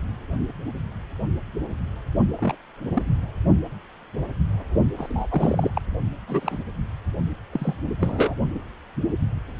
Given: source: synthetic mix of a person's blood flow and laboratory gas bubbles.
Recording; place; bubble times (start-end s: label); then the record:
Doppler ultrasound of blood flow; precordium
2.39-2.55 s: bubbles
2.78-3.16 s: bubbles
4.98-5.26 s: bubbles
5.30-5.71 s: bubbles
5.75-5.81 s: bubbles
6.27-6.58 s: bubbles
7.51-7.76 s: bubbles
7.99-8.36 s: bubbles
From the record:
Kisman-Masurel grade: 221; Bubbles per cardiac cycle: several, 3 to 8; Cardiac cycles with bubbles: 10 to 50%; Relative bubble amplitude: barely perceptible (0.100 to 0.250); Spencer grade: 2 (many but less than half of the cardiac periods contain bubble signals, singularly or in groups); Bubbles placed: only in the low amplitude regions of the cardiac cycle